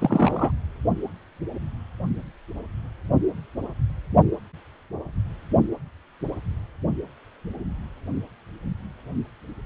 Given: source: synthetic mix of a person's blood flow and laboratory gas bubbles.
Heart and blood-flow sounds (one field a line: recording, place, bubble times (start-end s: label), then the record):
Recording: Doppler ultrasound of blood flow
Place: precordium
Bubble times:
0.00-0.52 s: bubbles
From the record:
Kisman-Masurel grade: 213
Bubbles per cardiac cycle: several, 3 to 8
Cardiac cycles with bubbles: 1 to 10%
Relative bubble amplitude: loud (0.450 to 0.775)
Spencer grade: 1 (occasional bubble signal discernible with the cardiac motion signal, with majority of cardiac periods free of bubbles)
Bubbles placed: only in the low amplitude regions of the cardiac cycle